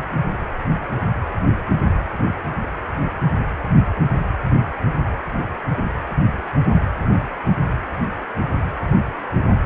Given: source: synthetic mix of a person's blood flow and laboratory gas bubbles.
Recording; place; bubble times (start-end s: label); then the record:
Doppler ultrasound of blood flow; precordium
no bubbles
From the record:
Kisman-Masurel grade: 000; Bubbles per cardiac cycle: 0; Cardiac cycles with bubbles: 0%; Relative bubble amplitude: no bubbles discernible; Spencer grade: 0 (complete lack of bubble signals)